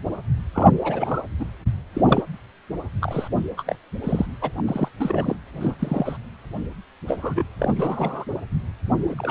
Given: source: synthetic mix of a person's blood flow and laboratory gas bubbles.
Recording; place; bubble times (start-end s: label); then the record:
Doppler ultrasound of blood flow; precordium
0.00-0.02 s: bubbles
0.54-0.69 s: bubbles
0.80-1.22 s: bubbles
1.40-1.45 s: bubbles
1.94-2.01 s: bubbles
2.06-2.22 s: bubbles
3.01-3.28 s: bubbles
3.57-3.63 s: bubbles
3.67-3.75 s: bubbles
4.04-4.26 s: bubbles
4.41-4.52 s: bubbles
4.58-4.62 s: bubbles
4.67-4.89 s: bubbles
4.99-5.36 s: bubbles
5.60-5.75 s: bubbles
5.79-6.17 s: bubbles
7.08-7.42 s: bubbles
7.59-7.74 s: bubbles
7.76-8.25 s: bubbles
9.00-9.15 s: bubbles
9.18-9.31 s: bubbles
From the record:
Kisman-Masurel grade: 232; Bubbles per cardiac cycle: several, 3 to 8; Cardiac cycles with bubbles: 50 to 99%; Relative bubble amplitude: moderate (0.250 to 0.450); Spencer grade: 3 (all of the cardiac periods contain showers or single bubble signals, but not dominating or overriding the cardiac motion signals); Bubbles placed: anywhere in the cardiac cycle